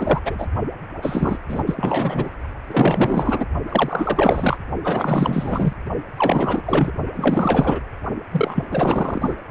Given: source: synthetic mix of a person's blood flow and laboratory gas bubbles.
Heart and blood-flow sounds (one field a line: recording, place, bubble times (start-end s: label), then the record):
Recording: Doppler ultrasound of blood flow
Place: precordium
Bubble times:
0.00-0.21 s: bubbles
0.24-0.47 s: bubbles
1.01-1.39 s: bubbles
1.48-1.63 s: bubbles
1.66-2.31 s: bubbles
2.67-3.46 s: bubbles
3.69-4.59 s: bubbles
4.84-5.73 s: bubbles
6.17-6.63 s: bubbles
6.65-6.92 s: bubbles
7.15-7.79 s: bubbles
8.31-8.65 s: bubbles
8.70-9.36 s: bubbles
From the record:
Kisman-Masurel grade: 444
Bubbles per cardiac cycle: continuous sound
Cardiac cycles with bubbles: 100%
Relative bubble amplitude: maximal (0.775 to 0.999)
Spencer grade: 4 (maximum detectable bubble signal sounding continuously throughout systole and diastole of every cardiac period, and overriding the amplitude of the normal cardiac signals)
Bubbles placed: only in the low amplitude regions of the cardiac cycle